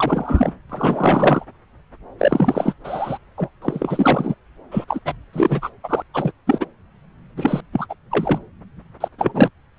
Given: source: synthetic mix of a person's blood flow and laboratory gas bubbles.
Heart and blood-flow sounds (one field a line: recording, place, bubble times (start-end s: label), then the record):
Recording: Doppler ultrasound of blood flow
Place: subclavian vein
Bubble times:
0.00-0.53 s: bubbles
0.69-1.46 s: bubbles
2.19-2.74 s: bubbles
2.84-3.18 s: bubbles
3.38-3.49 s: bubbles
3.62-4.35 s: bubbles
4.71-4.85 s: bubbles
4.88-5.00 s: bubbles
5.05-5.13 s: bubbles
5.33-5.70 s: bubbles
5.83-6.03 s: bubbles
6.13-6.32 s: bubbles
6.47-6.67 s: bubbles
7.36-7.61 s: bubbles
7.73-7.87 s: bubbles
7.89-7.95 s: bubbles
8.11-8.39 s: bubbles
9.00-9.08 s: bubbles
9.18-9.50 s: bubbles
From the record:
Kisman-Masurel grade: 333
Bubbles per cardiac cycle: rolling drumbeat, 9 or more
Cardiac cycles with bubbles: 50 to 99%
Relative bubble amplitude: loud (0.450 to 0.775)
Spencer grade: 3 (all of the cardiac periods contain showers or single bubble signals, but not dominating or overriding the cardiac motion signals)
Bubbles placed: anywhere in the cardiac cycle